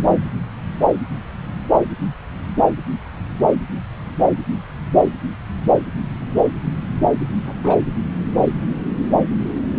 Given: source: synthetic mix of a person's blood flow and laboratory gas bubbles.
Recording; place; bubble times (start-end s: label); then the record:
Doppler ultrasound of blood flow; subclavian vein
7.45-7.81 s: bubbles
From the record:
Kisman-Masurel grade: 221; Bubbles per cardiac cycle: several, 3 to 8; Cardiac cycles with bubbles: 10 to 50%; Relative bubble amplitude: barely perceptible (0.100 to 0.250); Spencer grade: 2 (many but less than half of the cardiac periods contain bubble signals, singularly or in groups); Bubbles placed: anywhere in the cardiac cycle